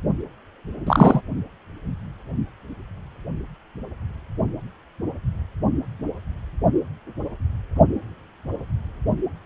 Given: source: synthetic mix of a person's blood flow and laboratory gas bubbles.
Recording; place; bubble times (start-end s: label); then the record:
Doppler ultrasound of blood flow; precordium
0.87-1.21 s: bubbles
From the record:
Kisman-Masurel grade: 123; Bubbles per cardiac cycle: 1 to 2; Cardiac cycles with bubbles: 10 to 50%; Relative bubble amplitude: loud (0.450 to 0.775); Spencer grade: 2 (many but less than half of the cardiac periods contain bubble signals, singularly or in groups); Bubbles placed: only in the low amplitude regions of the cardiac cycle